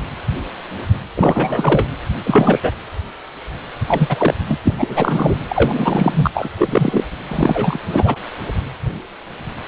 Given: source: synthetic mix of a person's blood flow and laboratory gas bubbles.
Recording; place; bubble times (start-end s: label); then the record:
Doppler ultrasound of blood flow; precordium
1.17-1.86 s: bubbles
2.23-2.60 s: bubbles
2.62-2.71 s: bubbles
3.86-4.34 s: bubbles
4.47-4.57 s: bubbles
4.64-4.74 s: bubbles
4.78-5.38 s: bubbles
5.48-6.31 s: bubbles
6.33-6.49 s: bubbles
6.57-7.05 s: bubbles
7.28-7.77 s: bubbles
7.91-8.16 s: bubbles
From the record:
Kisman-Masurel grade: 333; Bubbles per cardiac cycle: rolling drumbeat, 9 or more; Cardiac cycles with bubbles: 50 to 99%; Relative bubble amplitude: loud (0.450 to 0.775); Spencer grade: 3 (all of the cardiac periods contain showers or single bubble signals, but not dominating or overriding the cardiac motion signals); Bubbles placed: anywhere in the cardiac cycle